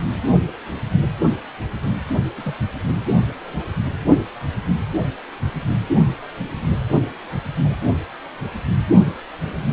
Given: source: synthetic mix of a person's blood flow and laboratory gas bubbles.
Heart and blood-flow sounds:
Doppler ultrasound of blood flow; precordium
2.37-2.57 s: bubbles
7.64-7.75 s: bubbles
From the record:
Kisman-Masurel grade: 121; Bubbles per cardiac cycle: 1 to 2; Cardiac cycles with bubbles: 10 to 50%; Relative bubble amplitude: barely perceptible (0.100 to 0.250); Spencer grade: 2 (many but less than half of the cardiac periods contain bubble signals, singularly or in groups); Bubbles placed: only in the low amplitude regions of the cardiac cycle

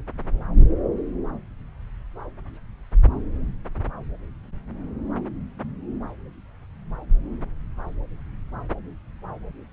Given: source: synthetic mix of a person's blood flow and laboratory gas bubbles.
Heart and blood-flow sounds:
Doppler ultrasound of blood flow; subclavian vein
no bubbles
From the record:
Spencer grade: 0 (complete lack of bubble signals)

